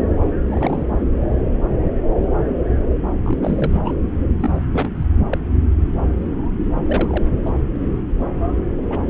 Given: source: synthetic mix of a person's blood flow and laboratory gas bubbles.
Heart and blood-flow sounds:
Doppler ultrasound of blood flow; subclavian vein
0.47-0.86 s: bubbles
3.25-3.38 s: bubbles
3.42-3.96 s: bubbles
4.40-4.58 s: bubbles
4.73-4.90 s: bubbles
4.97-5.06 s: bubbles
5.29-5.38 s: bubbles
6.86-7.32 s: bubbles
7.46-7.50 s: bubbles
8.89-8.99 s: bubbles
From the record:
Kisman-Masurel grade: 232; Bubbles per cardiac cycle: several, 3 to 8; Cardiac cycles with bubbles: 50 to 99%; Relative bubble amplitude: moderate (0.250 to 0.450); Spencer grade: 3 (all of the cardiac periods contain showers or single bubble signals, but not dominating or overriding the cardiac motion signals); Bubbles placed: anywhere in the cardiac cycle

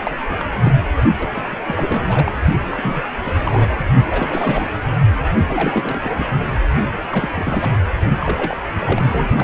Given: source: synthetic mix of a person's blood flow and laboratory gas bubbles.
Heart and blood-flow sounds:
Doppler ultrasound of blood flow; precordium
0.00-0.12 s: bubbles
0.29-0.45 s: bubbles
0.52-0.81 s: bubbles
1.19-1.58 s: bubbles
1.67-2.32 s: bubbles
2.70-3.08 s: bubbles
3.23-3.76 s: bubbles
4.10-4.70 s: bubbles
5.48-6.25 s: bubbles
7.11-7.29 s: bubbles
7.34-7.73 s: bubbles
8.19-8.56 s: bubbles
8.79-9.44 s: bubbles
From the record:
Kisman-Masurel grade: 332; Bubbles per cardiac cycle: rolling drumbeat, 9 or more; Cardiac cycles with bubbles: 50 to 99%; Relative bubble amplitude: moderate (0.250 to 0.450); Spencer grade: 3 (all of the cardiac periods contain showers or single bubble signals, but not dominating or overriding the cardiac motion signals); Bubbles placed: only in the low amplitude regions of the cardiac cycle

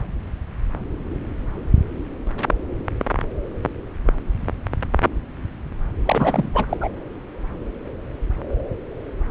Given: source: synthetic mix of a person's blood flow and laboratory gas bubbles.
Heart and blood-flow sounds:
Doppler ultrasound of blood flow; subclavian vein
6.05-6.49 s: bubbles
6.54-6.65 s: bubbles
6.69-6.77 s: bubbles
6.80-6.89 s: bubbles
From the record:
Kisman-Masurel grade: 212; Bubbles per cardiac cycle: several, 3 to 8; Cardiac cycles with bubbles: 1 to 10%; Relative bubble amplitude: moderate (0.250 to 0.450); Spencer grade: 1 (occasional bubble signal discernible with the cardiac motion signal, with majority of cardiac periods free of bubbles); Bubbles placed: anywhere in the cardiac cycle

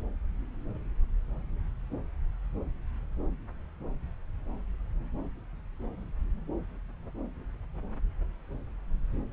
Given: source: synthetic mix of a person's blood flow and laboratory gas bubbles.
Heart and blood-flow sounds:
Doppler ultrasound of blood flow; subclavian vein
no bubbles
From the record:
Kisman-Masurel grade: 000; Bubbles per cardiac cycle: 0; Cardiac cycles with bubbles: 0%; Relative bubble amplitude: no bubbles discernible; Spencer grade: 0 (complete lack of bubble signals)

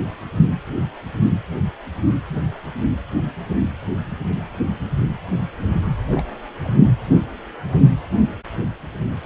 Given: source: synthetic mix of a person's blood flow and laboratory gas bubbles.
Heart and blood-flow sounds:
Doppler ultrasound of blood flow; precordium
6.12-6.25 s: bubbles
6.64-6.75 s: bubbles
From the record:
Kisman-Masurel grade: 211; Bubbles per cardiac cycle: several, 3 to 8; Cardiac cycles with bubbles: 1 to 10%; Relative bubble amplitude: barely perceptible (0.100 to 0.250); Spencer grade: 1 (occasional bubble signal discernible with the cardiac motion signal, with majority of cardiac periods free of bubbles); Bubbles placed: anywhere in the cardiac cycle

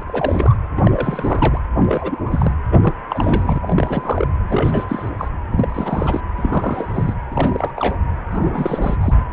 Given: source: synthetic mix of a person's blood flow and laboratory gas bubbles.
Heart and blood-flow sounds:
Doppler ultrasound of blood flow; precordium
0.00-0.03 s: bubbles
0.08-0.56 s: bubbles
0.77-1.60 s: bubbles
1.76-2.52 s: bubbles
2.71-2.79 s: bubbles
2.81-2.93 s: bubbles
3.10-3.58 s: bubbles
3.62-4.28 s: bubbles
4.48-4.84 s: bubbles
4.88-5.10 s: bubbles
5.18-5.29 s: bubbles
5.51-6.21 s: bubbles
6.37-7.14 s: bubbles
7.31-7.71 s: bubbles
7.76-7.97 s: bubbles
8.31-8.97 s: bubbles
9.00-9.15 s: bubbles
From the record:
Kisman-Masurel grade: 342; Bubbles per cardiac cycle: rolling drumbeat, 9 or more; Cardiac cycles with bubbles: 100%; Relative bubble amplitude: moderate (0.250 to 0.450); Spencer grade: 3 (all of the cardiac periods contain showers or single bubble signals, but not dominating or overriding the cardiac motion signals); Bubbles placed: anywhere in the cardiac cycle

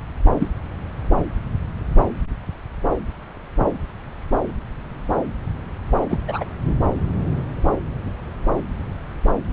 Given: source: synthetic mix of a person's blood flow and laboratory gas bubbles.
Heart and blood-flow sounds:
Doppler ultrasound of blood flow; subclavian vein
0.39-0.47 s: bubbles
6.09-6.18 s: bubbles
6.28-6.45 s: bubbles
From the record:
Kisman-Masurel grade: 122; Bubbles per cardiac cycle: 1 to 2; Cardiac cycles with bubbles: 10 to 50%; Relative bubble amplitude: moderate (0.250 to 0.450); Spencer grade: 2 (many but less than half of the cardiac periods contain bubble signals, singularly or in groups); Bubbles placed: anywhere in the cardiac cycle

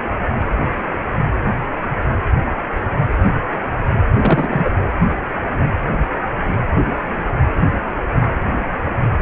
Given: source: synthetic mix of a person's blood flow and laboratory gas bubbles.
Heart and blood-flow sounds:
Doppler ultrasound of blood flow; precordium
4.11-4.70 s: bubbles
From the record:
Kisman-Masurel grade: 113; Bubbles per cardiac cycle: 1 to 2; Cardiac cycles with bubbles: 1 to 10%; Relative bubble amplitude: loud (0.450 to 0.775); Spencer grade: 1 (occasional bubble signal discernible with the cardiac motion signal, with majority of cardiac periods free of bubbles); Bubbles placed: anywhere in the cardiac cycle

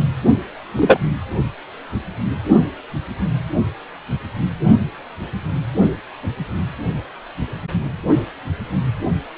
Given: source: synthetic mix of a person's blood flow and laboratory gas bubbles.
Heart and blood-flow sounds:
Doppler ultrasound of blood flow; precordium
0.76-0.98 s: bubbles
From the record:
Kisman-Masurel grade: 123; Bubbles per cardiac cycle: 1 to 2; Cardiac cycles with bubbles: 10 to 50%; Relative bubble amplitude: loud (0.450 to 0.775); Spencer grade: 2 (many but less than half of the cardiac periods contain bubble signals, singularly or in groups); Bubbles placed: only in the low amplitude regions of the cardiac cycle

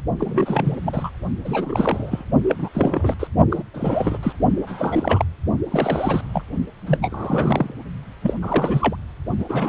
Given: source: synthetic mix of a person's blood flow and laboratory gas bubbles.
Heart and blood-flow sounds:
Doppler ultrasound of blood flow; precordium
0.18-0.77 s: bubbles
0.83-1.10 s: bubbles
1.45-2.25 s: bubbles
2.48-2.56 s: bubbles
2.58-2.69 s: bubbles
2.73-3.14 s: bubbles
3.19-3.27 s: bubbles
3.49-3.62 s: bubbles
3.73-4.18 s: bubbles
4.22-4.33 s: bubbles
4.67-5.24 s: bubbles
5.71-6.21 s: bubbles
6.33-6.42 s: bubbles
6.87-7.72 s: bubbles
8.22-8.34 s: bubbles
8.42-8.96 s: bubbles
9.38-9.45 s: bubbles
9.48-9.69 s: bubbles
From the record:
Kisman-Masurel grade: 332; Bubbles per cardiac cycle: rolling drumbeat, 9 or more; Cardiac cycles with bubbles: 50 to 99%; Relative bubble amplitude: moderate (0.250 to 0.450); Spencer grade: 3 (all of the cardiac periods contain showers or single bubble signals, but not dominating or overriding the cardiac motion signals); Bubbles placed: only in the low amplitude regions of the cardiac cycle

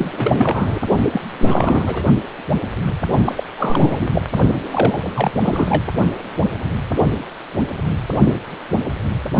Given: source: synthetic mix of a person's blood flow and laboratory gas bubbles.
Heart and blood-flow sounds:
Doppler ultrasound of blood flow; precordium
0.00-0.79 s: bubbles
1.12-1.21 s: bubbles
1.39-2.04 s: bubbles
3.25-3.43 s: bubbles
3.58-4.09 s: bubbles
4.13-4.21 s: bubbles
4.71-4.99 s: bubbles
5.14-5.31 s: bubbles
5.41-5.84 s: bubbles
From the record:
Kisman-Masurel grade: 332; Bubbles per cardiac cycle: rolling drumbeat, 9 or more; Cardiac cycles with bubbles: 50 to 99%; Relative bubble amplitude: moderate (0.250 to 0.450); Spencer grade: 3 (all of the cardiac periods contain showers or single bubble signals, but not dominating or overriding the cardiac motion signals); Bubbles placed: only in the low amplitude regions of the cardiac cycle

